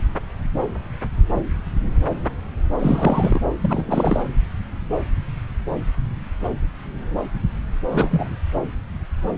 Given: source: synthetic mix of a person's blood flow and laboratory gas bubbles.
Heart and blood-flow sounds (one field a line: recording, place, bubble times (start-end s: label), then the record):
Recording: Doppler ultrasound of blood flow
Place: subclavian vein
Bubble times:
2.79-3.42 s: bubbles
3.60-4.25 s: bubbles
7.91-8.36 s: bubbles
From the record:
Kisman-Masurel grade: 222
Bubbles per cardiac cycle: several, 3 to 8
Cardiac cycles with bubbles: 10 to 50%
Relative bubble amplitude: moderate (0.250 to 0.450)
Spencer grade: 2 (many but less than half of the cardiac periods contain bubble signals, singularly or in groups)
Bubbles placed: anywhere in the cardiac cycle